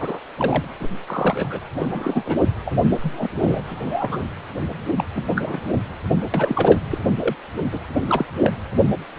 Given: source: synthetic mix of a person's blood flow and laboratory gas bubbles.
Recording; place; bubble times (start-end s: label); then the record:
Doppler ultrasound of blood flow; precordium
0.00-0.18 s: bubbles
0.37-0.65 s: bubbles
0.80-0.88 s: bubbles
1.06-1.59 s: bubbles
1.79-2.23 s: bubbles
2.25-2.38 s: bubbles
2.65-2.73 s: bubbles
2.92-2.98 s: bubbles
3.02-3.28 s: bubbles
3.41-3.63 s: bubbles
3.67-4.21 s: bubbles
4.96-5.04 s: bubbles
5.15-5.24 s: bubbles
5.35-5.60 s: bubbles
6.33-6.80 s: bubbles
6.91-6.98 s: bubbles
7.18-7.36 s: bubbles
7.71-7.79 s: bubbles
8.09-8.26 s: bubbles
8.43-8.51 s: bubbles
From the record:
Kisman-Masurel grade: 242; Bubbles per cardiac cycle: several, 3 to 8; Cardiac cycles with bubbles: 100%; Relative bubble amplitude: moderate (0.250 to 0.450); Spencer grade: 3 (all of the cardiac periods contain showers or single bubble signals, but not dominating or overriding the cardiac motion signals); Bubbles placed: anywhere in the cardiac cycle